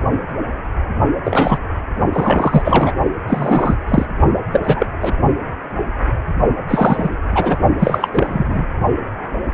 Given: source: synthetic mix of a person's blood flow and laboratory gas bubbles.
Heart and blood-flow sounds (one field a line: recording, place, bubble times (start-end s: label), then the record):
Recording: Doppler ultrasound of blood flow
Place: precordium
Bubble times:
1.24-1.58 s: bubbles
2.12-2.92 s: bubbles
3.27-3.75 s: bubbles
3.88-4.06 s: bubbles
4.53-4.60 s: bubbles
4.62-4.86 s: bubbles
5.01-5.15 s: bubbles
6.68-7.18 s: bubbles
7.31-7.59 s: bubbles
7.79-8.09 s: bubbles
8.13-8.66 s: bubbles
From the record:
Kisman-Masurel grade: 233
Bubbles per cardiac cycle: several, 3 to 8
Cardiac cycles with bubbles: 50 to 99%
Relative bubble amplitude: loud (0.450 to 0.775)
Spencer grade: 3 (all of the cardiac periods contain showers or single bubble signals, but not dominating or overriding the cardiac motion signals)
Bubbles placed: only in the low amplitude regions of the cardiac cycle